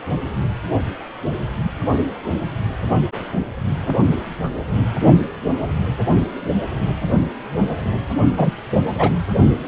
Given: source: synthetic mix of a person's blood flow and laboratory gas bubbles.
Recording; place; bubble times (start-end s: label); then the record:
Doppler ultrasound of blood flow; precordium
8.37-8.51 s: bubbles
8.98-9.10 s: bubbles
From the record:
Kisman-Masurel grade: 113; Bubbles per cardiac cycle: 1 to 2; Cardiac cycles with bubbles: 1 to 10%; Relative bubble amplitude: loud (0.450 to 0.775); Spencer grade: 1 (occasional bubble signal discernible with the cardiac motion signal, with majority of cardiac periods free of bubbles); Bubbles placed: only in the low amplitude regions of the cardiac cycle